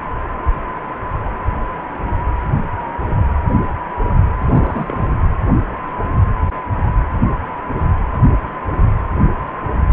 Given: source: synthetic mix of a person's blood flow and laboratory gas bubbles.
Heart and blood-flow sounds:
Doppler ultrasound of blood flow; precordium
4.38-5.15 s: bubbles
From the record:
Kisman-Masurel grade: 211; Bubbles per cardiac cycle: several, 3 to 8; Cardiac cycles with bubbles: 1 to 10%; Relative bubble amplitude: barely perceptible (0.100 to 0.250); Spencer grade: 1 (occasional bubble signal discernible with the cardiac motion signal, with majority of cardiac periods free of bubbles); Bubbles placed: anywhere in the cardiac cycle

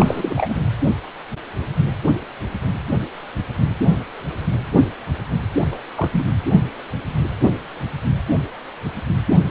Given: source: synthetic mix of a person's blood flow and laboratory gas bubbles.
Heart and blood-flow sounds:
Doppler ultrasound of blood flow; precordium
0.00-0.60 s: bubbles
5.54-5.67 s: bubbles
5.72-5.79 s: bubbles
5.97-6.26 s: bubbles
From the record:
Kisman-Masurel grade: 222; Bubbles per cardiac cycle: several, 3 to 8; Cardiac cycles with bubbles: 10 to 50%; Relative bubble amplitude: moderate (0.250 to 0.450); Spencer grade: 2 (many but less than half of the cardiac periods contain bubble signals, singularly or in groups); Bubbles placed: anywhere in the cardiac cycle

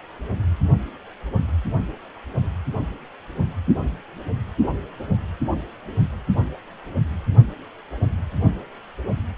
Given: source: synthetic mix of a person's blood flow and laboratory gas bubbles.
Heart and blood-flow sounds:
Doppler ultrasound of blood flow; precordium
no bubbles
From the record:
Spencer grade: 0 (complete lack of bubble signals)

